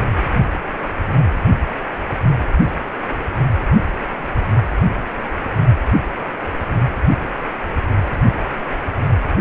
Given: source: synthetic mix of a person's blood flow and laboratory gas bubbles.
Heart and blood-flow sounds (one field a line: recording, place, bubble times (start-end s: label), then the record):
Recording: Doppler ultrasound of blood flow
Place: precordium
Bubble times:
no bubbles
From the record:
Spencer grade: 0 (complete lack of bubble signals)